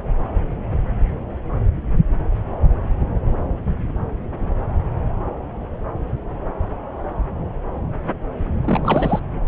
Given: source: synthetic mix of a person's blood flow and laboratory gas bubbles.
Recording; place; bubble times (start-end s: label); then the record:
Doppler ultrasound of blood flow; subclavian vein
8.61-9.20 s: bubbles
From the record:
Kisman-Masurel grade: 213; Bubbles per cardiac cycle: several, 3 to 8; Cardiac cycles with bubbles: 1 to 10%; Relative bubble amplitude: loud (0.450 to 0.775); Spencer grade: 1 (occasional bubble signal discernible with the cardiac motion signal, with majority of cardiac periods free of bubbles); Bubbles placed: anywhere in the cardiac cycle